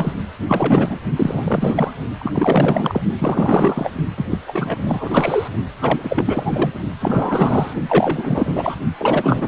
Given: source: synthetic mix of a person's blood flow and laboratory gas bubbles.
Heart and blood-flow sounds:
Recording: Doppler ultrasound of blood flow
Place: precordium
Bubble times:
0.00-0.13 s: bubbles
0.48-1.00 s: bubbles
1.16-1.92 s: bubbles
2.18-3.03 s: bubbles
3.18-3.92 s: bubbles
4.17-4.25 s: bubbles
4.29-4.38 s: bubbles
4.48-5.48 s: bubbles
5.80-6.72 s: bubbles
6.99-7.74 s: bubbles
7.88-8.75 s: bubbles
8.98-9.48 s: bubbles
From the record:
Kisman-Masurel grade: 444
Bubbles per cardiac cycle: continuous sound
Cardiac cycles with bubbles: 100%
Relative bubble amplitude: maximal (0.775 to 0.999)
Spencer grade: 4 (maximum detectable bubble signal sounding continuously throughout systole and diastole of every cardiac period, and overriding the amplitude of the normal cardiac signals)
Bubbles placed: only in the low amplitude regions of the cardiac cycle

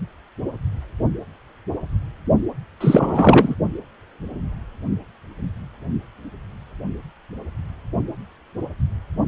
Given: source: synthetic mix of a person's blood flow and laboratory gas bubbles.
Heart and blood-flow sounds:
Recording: Doppler ultrasound of blood flow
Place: precordium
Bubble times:
2.80-3.55 s: bubbles
From the record:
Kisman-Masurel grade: 213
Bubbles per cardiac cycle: several, 3 to 8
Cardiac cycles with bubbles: 1 to 10%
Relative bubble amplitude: loud (0.450 to 0.775)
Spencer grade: 1 (occasional bubble signal discernible with the cardiac motion signal, with majority of cardiac periods free of bubbles)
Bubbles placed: only in the low amplitude regions of the cardiac cycle

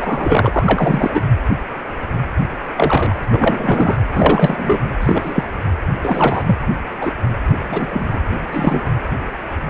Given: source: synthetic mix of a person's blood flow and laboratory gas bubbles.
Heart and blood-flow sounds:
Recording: Doppler ultrasound of blood flow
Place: precordium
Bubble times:
0.00-1.21 s: bubbles
2.77-3.14 s: bubbles
3.31-3.97 s: bubbles
4.14-4.79 s: bubbles
5.00-5.43 s: bubbles
6.03-6.43 s: bubbles
6.46-6.56 s: bubbles
7.01-7.12 s: bubbles
7.68-8.21 s: bubbles
8.53-8.91 s: bubbles
From the record:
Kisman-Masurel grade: 233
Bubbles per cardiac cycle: several, 3 to 8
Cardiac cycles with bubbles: 50 to 99%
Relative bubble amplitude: loud (0.450 to 0.775)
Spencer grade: 3 (all of the cardiac periods contain showers or single bubble signals, but not dominating or overriding the cardiac motion signals)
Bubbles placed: anywhere in the cardiac cycle

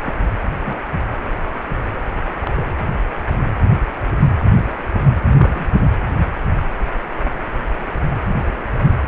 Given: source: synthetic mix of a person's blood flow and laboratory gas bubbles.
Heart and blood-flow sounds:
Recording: Doppler ultrasound of blood flow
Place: precordium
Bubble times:
0.05-0.12 s: bubbles
0.66-0.74 s: bubbles
2.38-2.74 s: bubbles
5.37-5.73 s: bubbles
7.76-7.86 s: bubbles
From the record:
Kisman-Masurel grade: 121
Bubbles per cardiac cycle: 1 to 2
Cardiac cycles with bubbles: 10 to 50%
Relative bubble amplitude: barely perceptible (0.100 to 0.250)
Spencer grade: 2 (many but less than half of the cardiac periods contain bubble signals, singularly or in groups)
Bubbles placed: anywhere in the cardiac cycle

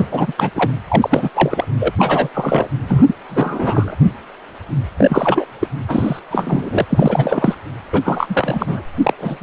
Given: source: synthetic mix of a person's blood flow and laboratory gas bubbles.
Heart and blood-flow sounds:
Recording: Doppler ultrasound of blood flow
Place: precordium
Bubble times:
0.00-0.05 s: bubbles
0.11-0.33 s: bubbles
0.37-0.50 s: bubbles
0.55-0.71 s: bubbles
0.88-1.30 s: bubbles
1.34-1.71 s: bubbles
1.79-1.93 s: bubbles
1.98-2.29 s: bubbles
2.34-2.68 s: bubbles
2.88-3.04 s: bubbles
3.07-3.14 s: bubbles
3.29-3.97 s: bubbles
4.98-5.48 s: bubbles
5.59-5.67 s: bubbles
5.88-6.20 s: bubbles
6.30-6.85 s: bubbles
6.89-7.54 s: bubbles
7.92-8.82 s: bubbles
9.03-9.13 s: bubbles
9.17-9.43 s: bubbles
From the record:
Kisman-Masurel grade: 333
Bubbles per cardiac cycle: rolling drumbeat, 9 or more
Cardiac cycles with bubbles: 50 to 99%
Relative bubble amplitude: loud (0.450 to 0.775)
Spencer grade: 3 (all of the cardiac periods contain showers or single bubble signals, but not dominating or overriding the cardiac motion signals)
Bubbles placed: anywhere in the cardiac cycle

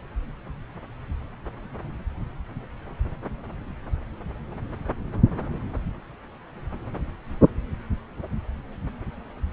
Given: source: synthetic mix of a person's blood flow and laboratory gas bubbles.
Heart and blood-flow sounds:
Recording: Doppler ultrasound of blood flow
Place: subclavian vein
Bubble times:
no bubbles
From the record:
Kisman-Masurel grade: 000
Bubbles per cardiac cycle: 0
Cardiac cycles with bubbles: 0%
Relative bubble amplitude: no bubbles discernible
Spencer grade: 0 (complete lack of bubble signals)

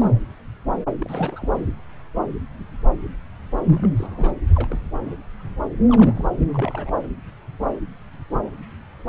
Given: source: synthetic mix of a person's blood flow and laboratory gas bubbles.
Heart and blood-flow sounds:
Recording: Doppler ultrasound of blood flow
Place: subclavian vein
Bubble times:
0.00-0.12 s: bubbles
0.99-1.49 s: bubbles
3.66-3.92 s: bubbles
3.96-4.33 s: bubbles
4.55-4.78 s: bubbles
5.03-5.16 s: bubbles
5.88-6.47 s: bubbles
6.54-6.91 s: bubbles
From the record:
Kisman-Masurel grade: 221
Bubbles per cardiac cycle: several, 3 to 8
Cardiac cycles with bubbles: 10 to 50%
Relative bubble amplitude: barely perceptible (0.100 to 0.250)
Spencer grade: 2 (many but less than half of the cardiac periods contain bubble signals, singularly or in groups)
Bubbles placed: anywhere in the cardiac cycle

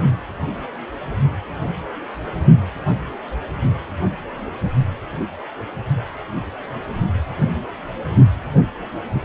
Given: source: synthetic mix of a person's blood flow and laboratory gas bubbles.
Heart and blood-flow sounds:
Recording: Doppler ultrasound of blood flow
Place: precordium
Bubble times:
no bubbles
From the record:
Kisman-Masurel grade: 000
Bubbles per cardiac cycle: 0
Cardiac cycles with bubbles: 0%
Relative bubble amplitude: no bubbles discernible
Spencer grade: 0 (complete lack of bubble signals)

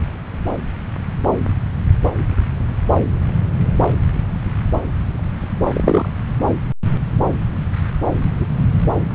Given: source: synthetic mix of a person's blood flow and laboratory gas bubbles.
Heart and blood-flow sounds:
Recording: Doppler ultrasound of blood flow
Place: subclavian vein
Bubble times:
5.66-6.09 s: bubbles
8.40-8.46 s: bubbles
From the record:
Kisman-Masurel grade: 123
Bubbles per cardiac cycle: 1 to 2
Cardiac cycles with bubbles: 10 to 50%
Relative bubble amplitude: loud (0.450 to 0.775)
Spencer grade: 2 (many but less than half of the cardiac periods contain bubble signals, singularly or in groups)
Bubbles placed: anywhere in the cardiac cycle

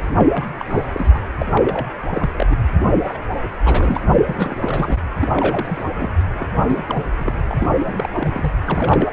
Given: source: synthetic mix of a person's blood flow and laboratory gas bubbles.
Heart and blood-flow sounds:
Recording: Doppler ultrasound of blood flow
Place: precordium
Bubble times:
0.18-0.26 s: bubbles
0.32-0.45 s: bubbles
0.57-0.66 s: bubbles
0.69-0.84 s: bubbles
0.91-1.28 s: bubbles
1.38-1.46 s: bubbles
1.54-1.88 s: bubbles
2.10-2.30 s: bubbles
2.38-2.46 s: bubbles
2.50-2.56 s: bubbles
3.03-3.18 s: bubbles
3.64-4.03 s: bubbles
4.09-4.23 s: bubbles
4.26-4.98 s: bubbles
5.20-5.29 s: bubbles
5.34-5.84 s: bubbles
5.96-6.17 s: bubbles
6.33-6.48 s: bubbles
6.62-6.83 s: bubbles
6.87-7.10 s: bubbles
7.17-7.35 s: bubbles
7.49-8.09 s: bubbles
8.13-8.52 s: bubbles
8.64-9.12 s: bubbles
From the record:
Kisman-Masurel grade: 342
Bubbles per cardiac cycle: rolling drumbeat, 9 or more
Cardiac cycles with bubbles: 100%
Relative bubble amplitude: moderate (0.250 to 0.450)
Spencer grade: 3 (all of the cardiac periods contain showers or single bubble signals, but not dominating or overriding the cardiac motion signals)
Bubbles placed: anywhere in the cardiac cycle

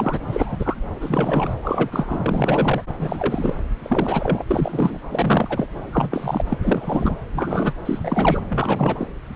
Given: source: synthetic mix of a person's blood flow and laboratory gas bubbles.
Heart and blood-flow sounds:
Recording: Doppler ultrasound of blood flow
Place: subclavian vein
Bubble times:
0.00-0.20 s: bubbles
0.27-0.74 s: bubbles
1.00-1.54 s: bubbles
1.62-2.19 s: bubbles
2.22-2.83 s: bubbles
2.99-3.56 s: bubbles
3.83-4.42 s: bubbles
4.47-5.01 s: bubbles
5.09-5.66 s: bubbles
5.92-6.44 s: bubbles
6.50-6.58 s: bubbles
6.62-7.17 s: bubbles
7.33-7.73 s: bubbles
7.85-8.42 s: bubbles
8.49-9.07 s: bubbles
From the record:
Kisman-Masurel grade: 342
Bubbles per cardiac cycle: rolling drumbeat, 9 or more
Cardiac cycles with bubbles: 100%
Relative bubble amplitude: moderate (0.250 to 0.450)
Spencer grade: 3 (all of the cardiac periods contain showers or single bubble signals, but not dominating or overriding the cardiac motion signals)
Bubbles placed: anywhere in the cardiac cycle

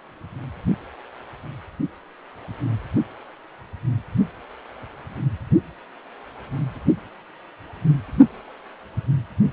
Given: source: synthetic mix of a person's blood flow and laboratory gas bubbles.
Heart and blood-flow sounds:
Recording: Doppler ultrasound of blood flow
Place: precordium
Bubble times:
no bubbles
From the record:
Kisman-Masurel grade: 000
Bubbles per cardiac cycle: 0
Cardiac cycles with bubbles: 0%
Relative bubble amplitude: no bubbles discernible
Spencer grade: 0 (complete lack of bubble signals)

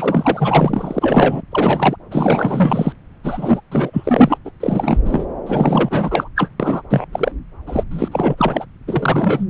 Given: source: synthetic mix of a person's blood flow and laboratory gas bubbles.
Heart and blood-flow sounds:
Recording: Doppler ultrasound of blood flow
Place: subclavian vein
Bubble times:
0.00-1.41 s: bubbles
1.51-1.96 s: bubbles
2.10-2.93 s: bubbles
3.23-3.61 s: bubbles
3.71-4.38 s: bubbles
4.45-4.51 s: bubbles
4.60-4.99 s: bubbles
5.05-5.27 s: bubbles
5.46-6.29 s: bubbles
6.36-6.50 s: bubbles
6.59-6.82 s: bubbles
6.90-7.05 s: bubbles
7.12-7.32 s: bubbles
7.66-7.84 s: bubbles
7.90-8.09 s: bubbles
8.12-8.35 s: bubbles
8.38-8.65 s: bubbles
8.87-9.45 s: bubbles
From the record:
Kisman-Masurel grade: 444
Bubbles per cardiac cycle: continuous sound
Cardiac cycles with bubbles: 100%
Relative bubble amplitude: maximal (0.775 to 0.999)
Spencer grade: 4 (maximum detectable bubble signal sounding continuously throughout systole and diastole of every cardiac period, and overriding the amplitude of the normal cardiac signals)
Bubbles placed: anywhere in the cardiac cycle

